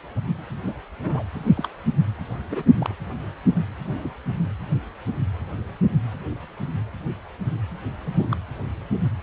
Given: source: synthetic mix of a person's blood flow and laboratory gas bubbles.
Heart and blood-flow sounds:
Doppler ultrasound of blood flow; precordium
0.67-0.74 s: bubbles
1.03-1.23 s: bubbles
1.31-1.68 s: bubbles
2.50-2.64 s: bubbles
2.77-2.94 s: bubbles
3.85-4.13 s: bubbles
8.06-8.35 s: bubbles
From the record:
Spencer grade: 2 (many but less than half of the cardiac periods contain bubble signals, singularly or in groups); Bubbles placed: anywhere in the cardiac cycle

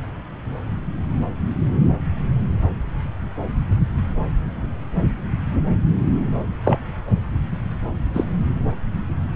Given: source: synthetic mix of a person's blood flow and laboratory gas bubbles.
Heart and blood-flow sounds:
Doppler ultrasound of blood flow; subclavian vein
6.63-6.79 s: bubbles
8.13-8.25 s: bubbles
From the record:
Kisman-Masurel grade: 113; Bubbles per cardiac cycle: 1 to 2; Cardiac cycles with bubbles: 1 to 10%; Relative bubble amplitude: loud (0.450 to 0.775); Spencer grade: 1 (occasional bubble signal discernible with the cardiac motion signal, with majority of cardiac periods free of bubbles); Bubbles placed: anywhere in the cardiac cycle

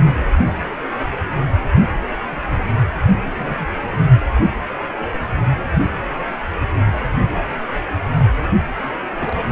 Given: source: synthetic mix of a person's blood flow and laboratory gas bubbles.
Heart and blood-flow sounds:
Doppler ultrasound of blood flow; precordium
0.04-0.29 s: bubbles
3.34-3.67 s: bubbles
9.19-9.35 s: bubbles
From the record:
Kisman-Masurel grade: 121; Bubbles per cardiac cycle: 1 to 2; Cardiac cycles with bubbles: 10 to 50%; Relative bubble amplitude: barely perceptible (0.100 to 0.250); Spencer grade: 2 (many but less than half of the cardiac periods contain bubble signals, singularly or in groups); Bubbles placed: anywhere in the cardiac cycle

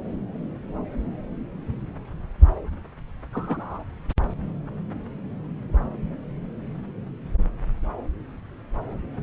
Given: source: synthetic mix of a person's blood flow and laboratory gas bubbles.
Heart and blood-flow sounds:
Doppler ultrasound of blood flow; subclavian vein
3.33-3.84 s: bubbles
From the record:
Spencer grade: 1 (occasional bubble signal discernible with the cardiac motion signal, with majority of cardiac periods free of bubbles); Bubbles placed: anywhere in the cardiac cycle

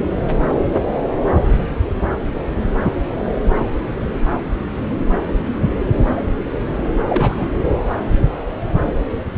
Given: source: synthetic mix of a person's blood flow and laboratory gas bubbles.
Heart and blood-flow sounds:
Doppler ultrasound of blood flow; subclavian vein
7.03-7.58 s: bubbles
From the record:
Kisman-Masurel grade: 212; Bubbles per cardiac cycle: several, 3 to 8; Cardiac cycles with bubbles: 1 to 10%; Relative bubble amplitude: moderate (0.250 to 0.450); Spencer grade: 1 (occasional bubble signal discernible with the cardiac motion signal, with majority of cardiac periods free of bubbles); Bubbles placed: anywhere in the cardiac cycle

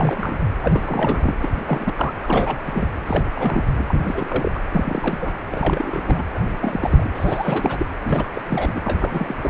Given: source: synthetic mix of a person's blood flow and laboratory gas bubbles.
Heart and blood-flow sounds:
Doppler ultrasound of blood flow; precordium
0.00-0.45 s: bubbles
0.62-1.34 s: bubbles
1.41-1.62 s: bubbles
1.67-1.94 s: bubbles
1.96-2.12 s: bubbles
2.23-2.88 s: bubbles
3.06-3.25 s: bubbles
3.33-3.67 s: bubbles
3.78-3.83 s: bubbles
3.87-4.61 s: bubbles
4.71-5.33 s: bubbles
5.51-6.25 s: bubbles
6.34-6.41 s: bubbles
6.62-7.12 s: bubbles
7.15-7.86 s: bubbles
8.04-8.27 s: bubbles
8.34-8.42 s: bubbles
8.48-8.81 s: bubbles
8.84-9.35 s: bubbles
9.43-9.50 s: bubbles
From the record:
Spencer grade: 3 (all of the cardiac periods contain showers or single bubble signals, but not dominating or overriding the cardiac motion signals); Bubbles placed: anywhere in the cardiac cycle

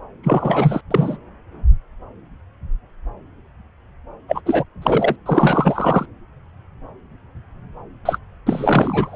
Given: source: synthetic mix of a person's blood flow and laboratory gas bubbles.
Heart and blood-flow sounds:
Doppler ultrasound of blood flow; subclavian vein
0.23-0.81 s: bubbles
0.90-1.17 s: bubbles
4.28-4.41 s: bubbles
4.46-4.64 s: bubbles
4.82-5.16 s: bubbles
5.25-6.06 s: bubbles
8.05-8.18 s: bubbles
8.46-9.16 s: bubbles
From the record:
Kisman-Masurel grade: 333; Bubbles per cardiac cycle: rolling drumbeat, 9 or more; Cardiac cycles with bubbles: 50 to 99%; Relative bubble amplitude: loud (0.450 to 0.775); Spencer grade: 3 (all of the cardiac periods contain showers or single bubble signals, but not dominating or overriding the cardiac motion signals); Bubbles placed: anywhere in the cardiac cycle

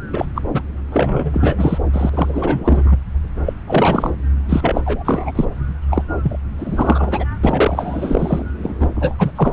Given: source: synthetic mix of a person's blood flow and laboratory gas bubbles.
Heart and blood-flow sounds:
Doppler ultrasound of blood flow; subclavian vein
0.12-0.26 s: bubbles
0.35-0.42 s: bubbles
0.53-0.62 s: bubbles
0.90-1.78 s: bubbles
1.93-2.10 s: bubbles
2.12-2.97 s: bubbles
3.46-3.54 s: bubbles
3.67-4.11 s: bubbles
4.49-4.81 s: bubbles
4.85-5.32 s: bubbles
5.35-5.45 s: bubbles
5.90-6.04 s: bubbles
6.23-6.38 s: bubbles
6.58-7.25 s: bubbles
7.43-8.45 s: bubbles
8.62-8.88 s: bubbles
8.95-9.14 s: bubbles
9.18-9.31 s: bubbles
9.36-9.53 s: bubbles
From the record:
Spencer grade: 3 (all of the cardiac periods contain showers or single bubble signals, but not dominating or overriding the cardiac motion signals); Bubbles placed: anywhere in the cardiac cycle

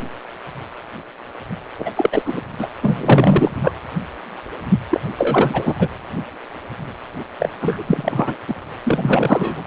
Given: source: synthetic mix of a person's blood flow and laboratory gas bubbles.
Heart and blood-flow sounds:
Doppler ultrasound of blood flow; precordium
1.78-1.91 s: bubbles
1.95-2.22 s: bubbles
2.25-2.41 s: bubbles
2.58-2.67 s: bubbles
2.82-3.50 s: bubbles
3.62-3.72 s: bubbles
4.90-5.00 s: bubbles
5.17-5.75 s: bubbles
5.79-5.89 s: bubbles
7.40-7.50 s: bubbles
7.61-7.83 s: bubbles
7.87-8.37 s: bubbles
8.47-8.55 s: bubbles
8.86-9.61 s: bubbles
From the record:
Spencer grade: 3 (all of the cardiac periods contain showers or single bubble signals, but not dominating or overriding the cardiac motion signals); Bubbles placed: anywhere in the cardiac cycle

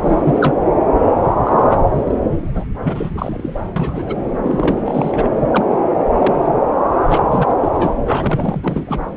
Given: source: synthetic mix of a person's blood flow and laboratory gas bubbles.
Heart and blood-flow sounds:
Doppler ultrasound of blood flow; subclavian vein
0.00-0.55 s: bubbles
1.43-1.85 s: bubbles
1.96-2.15 s: bubbles
2.54-2.64 s: bubbles
2.80-3.10 s: bubbles
3.14-3.60 s: bubbles
3.76-4.15 s: bubbles
4.43-4.81 s: bubbles
4.85-5.29 s: bubbles
5.40-5.64 s: bubbles
5.71-5.78 s: bubbles
6.12-6.58 s: bubbles
7.06-7.23 s: bubbles
7.29-7.55 s: bubbles
7.61-7.97 s: bubbles
8.07-9.01 s: bubbles
From the record:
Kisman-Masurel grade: 242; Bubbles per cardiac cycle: several, 3 to 8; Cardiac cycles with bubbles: 100%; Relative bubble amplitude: moderate (0.250 to 0.450); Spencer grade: 3 (all of the cardiac periods contain showers or single bubble signals, but not dominating or overriding the cardiac motion signals); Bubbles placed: anywhere in the cardiac cycle

